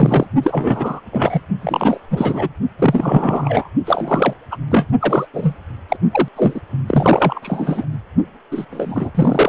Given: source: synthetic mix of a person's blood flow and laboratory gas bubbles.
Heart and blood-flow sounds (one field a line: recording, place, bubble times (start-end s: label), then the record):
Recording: Doppler ultrasound of blood flow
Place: precordium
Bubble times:
0.00-0.27 s: bubbles
0.42-1.00 s: bubbles
1.11-1.41 s: bubbles
1.61-2.00 s: bubbles
2.10-2.49 s: bubbles
2.79-3.69 s: bubbles
3.85-4.33 s: bubbles
4.50-4.56 s: bubbles
4.70-4.86 s: bubbles
5.00-5.27 s: bubbles
5.33-5.56 s: bubbles
5.88-5.97 s: bubbles
6.11-6.29 s: bubbles
6.36-6.60 s: bubbles
6.87-7.85 s: bubbles
8.51-8.66 s: bubbles
8.70-9.12 s: bubbles
9.15-9.49 s: bubbles
From the record:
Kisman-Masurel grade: 333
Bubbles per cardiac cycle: rolling drumbeat, 9 or more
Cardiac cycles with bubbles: 50 to 99%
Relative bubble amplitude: loud (0.450 to 0.775)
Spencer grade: 3 (all of the cardiac periods contain showers or single bubble signals, but not dominating or overriding the cardiac motion signals)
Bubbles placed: only in the low amplitude regions of the cardiac cycle